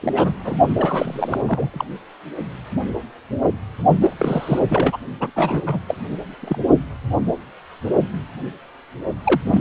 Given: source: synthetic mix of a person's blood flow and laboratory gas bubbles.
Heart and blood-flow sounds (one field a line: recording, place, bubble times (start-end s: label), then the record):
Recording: Doppler ultrasound of blood flow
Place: precordium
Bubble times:
0.01-0.32 s: bubbles
0.45-0.58 s: bubbles
0.78-1.43 s: bubbles
1.47-1.85 s: bubbles
4.00-4.15 s: bubbles
4.19-4.60 s: bubbles
4.69-4.97 s: bubbles
5.19-5.30 s: bubbles
5.35-5.62 s: bubbles
5.66-5.79 s: bubbles
5.88-5.95 s: bubbles
6.41-6.57 s: bubbles
9.24-9.41 s: bubbles
9.46-9.61 s: bubbles
From the record:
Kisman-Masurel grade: 232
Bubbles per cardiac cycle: several, 3 to 8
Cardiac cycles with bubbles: 50 to 99%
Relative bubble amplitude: moderate (0.250 to 0.450)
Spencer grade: 3 (all of the cardiac periods contain showers or single bubble signals, but not dominating or overriding the cardiac motion signals)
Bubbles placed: only in the low amplitude regions of the cardiac cycle